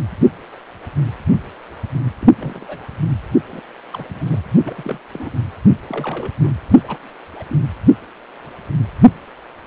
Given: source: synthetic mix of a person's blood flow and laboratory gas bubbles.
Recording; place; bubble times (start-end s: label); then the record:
Doppler ultrasound of blood flow; precordium
2.21-2.28 s: bubbles
2.38-2.78 s: bubbles
3.49-3.61 s: bubbles
3.94-4.04 s: bubbles
4.08-4.38 s: bubbles
4.64-4.99 s: bubbles
5.12-5.30 s: bubbles
5.69-5.77 s: bubbles
5.88-6.32 s: bubbles
6.42-6.53 s: bubbles
6.69-6.78 s: bubbles
6.84-6.98 s: bubbles
7.39-7.44 s: bubbles
7.49-7.56 s: bubbles
From the record:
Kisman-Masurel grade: 221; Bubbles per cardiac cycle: several, 3 to 8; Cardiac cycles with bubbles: 10 to 50%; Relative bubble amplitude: barely perceptible (0.100 to 0.250); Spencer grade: 2 (many but less than half of the cardiac periods contain bubble signals, singularly or in groups); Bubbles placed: anywhere in the cardiac cycle